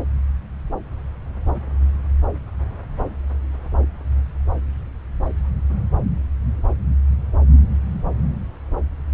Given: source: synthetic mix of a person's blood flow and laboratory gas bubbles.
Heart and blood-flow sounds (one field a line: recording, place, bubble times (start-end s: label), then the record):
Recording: Doppler ultrasound of blood flow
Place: subclavian vein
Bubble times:
no bubbles
From the record:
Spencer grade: 0 (complete lack of bubble signals)